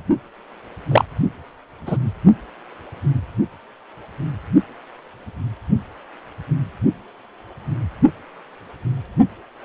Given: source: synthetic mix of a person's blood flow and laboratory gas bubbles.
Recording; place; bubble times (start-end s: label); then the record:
Doppler ultrasound of blood flow; precordium
0.91-1.04 s: bubbles
1.86-1.97 s: bubbles
From the record:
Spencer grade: 1 (occasional bubble signal discernible with the cardiac motion signal, with majority of cardiac periods free of bubbles); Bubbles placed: only in the low amplitude regions of the cardiac cycle